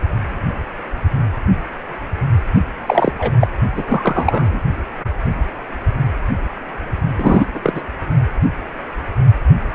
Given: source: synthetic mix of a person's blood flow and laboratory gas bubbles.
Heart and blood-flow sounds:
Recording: Doppler ultrasound of blood flow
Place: precordium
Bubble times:
2.86-3.12 s: bubbles
3.19-3.31 s: bubbles
3.40-3.48 s: bubbles
3.75-3.83 s: bubbles
3.87-4.62 s: bubbles
7.17-7.46 s: bubbles
7.54-7.81 s: bubbles
From the record:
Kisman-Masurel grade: 223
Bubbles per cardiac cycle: several, 3 to 8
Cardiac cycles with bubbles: 10 to 50%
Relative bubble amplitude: loud (0.450 to 0.775)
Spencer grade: 2 (many but less than half of the cardiac periods contain bubble signals, singularly or in groups)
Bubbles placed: only in the low amplitude regions of the cardiac cycle

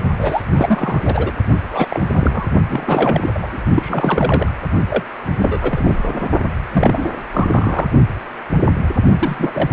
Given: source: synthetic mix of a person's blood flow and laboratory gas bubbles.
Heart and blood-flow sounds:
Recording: Doppler ultrasound of blood flow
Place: precordium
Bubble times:
0.18-0.42 s: bubbles
0.51-1.01 s: bubbles
1.05-1.31 s: bubbles
1.71-1.87 s: bubbles
1.90-2.46 s: bubbles
2.69-3.60 s: bubbles
3.74-4.51 s: bubbles
4.88-5.03 s: bubbles
5.36-5.59 s: bubbles
5.62-6.30 s: bubbles
6.72-7.08 s: bubbles
7.32-7.91 s: bubbles
9.21-9.71 s: bubbles
From the record:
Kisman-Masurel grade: 332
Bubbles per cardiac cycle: rolling drumbeat, 9 or more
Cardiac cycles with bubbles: 50 to 99%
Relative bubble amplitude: moderate (0.250 to 0.450)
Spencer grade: 3 (all of the cardiac periods contain showers or single bubble signals, but not dominating or overriding the cardiac motion signals)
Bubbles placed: only in the low amplitude regions of the cardiac cycle

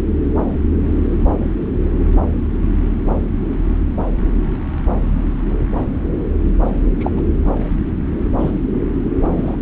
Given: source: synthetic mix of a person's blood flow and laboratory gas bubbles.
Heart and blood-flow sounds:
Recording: Doppler ultrasound of blood flow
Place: subclavian vein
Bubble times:
6.99-7.11 s: bubbles
7.15-7.22 s: bubbles
8.38-8.51 s: bubbles
9.37-9.56 s: bubbles
From the record:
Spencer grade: 2 (many but less than half of the cardiac periods contain bubble signals, singularly or in groups)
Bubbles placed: anywhere in the cardiac cycle

